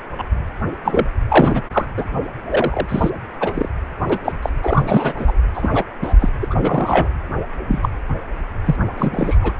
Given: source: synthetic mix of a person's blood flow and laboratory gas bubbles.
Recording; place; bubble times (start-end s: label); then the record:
Doppler ultrasound of blood flow; precordium
0.18-0.23 s: bubbles
0.84-1.06 s: bubbles
1.29-1.61 s: bubbles
1.73-1.85 s: bubbles
1.97-2.04 s: bubbles
2.49-3.10 s: bubbles
3.40-3.69 s: bubbles
4.09-4.18 s: bubbles
4.25-4.32 s: bubbles
4.42-4.50 s: bubbles
4.63-5.13 s: bubbles
5.17-5.33 s: bubbles
5.54-5.84 s: bubbles
6.01-6.14 s: bubbles
6.20-6.29 s: bubbles
6.41-6.47 s: bubbles
6.50-7.08 s: bubbles
7.67-7.89 s: bubbles
8.65-8.76 s: bubbles
8.97-9.37 s: bubbles
9.41-9.54 s: bubbles
From the record:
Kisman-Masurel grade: 243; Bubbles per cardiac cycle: several, 3 to 8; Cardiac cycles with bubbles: 100%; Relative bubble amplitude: loud (0.450 to 0.775); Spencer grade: 3 (all of the cardiac periods contain showers or single bubble signals, but not dominating or overriding the cardiac motion signals); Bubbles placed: anywhere in the cardiac cycle